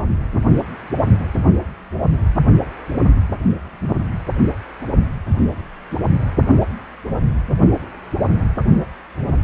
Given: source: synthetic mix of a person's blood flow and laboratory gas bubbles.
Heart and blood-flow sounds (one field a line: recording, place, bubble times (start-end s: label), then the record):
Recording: Doppler ultrasound of blood flow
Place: precordium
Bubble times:
no bubbles
From the record:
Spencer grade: 0 (complete lack of bubble signals)